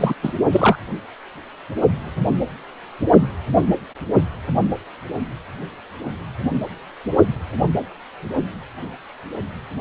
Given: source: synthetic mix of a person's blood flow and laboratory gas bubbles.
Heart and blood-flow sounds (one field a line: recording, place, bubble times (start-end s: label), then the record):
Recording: Doppler ultrasound of blood flow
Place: precordium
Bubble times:
0.00-0.14 s: bubbles
0.23-0.32 s: bubbles
0.51-0.77 s: bubbles
From the record:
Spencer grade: 1 (occasional bubble signal discernible with the cardiac motion signal, with majority of cardiac periods free of bubbles)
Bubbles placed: anywhere in the cardiac cycle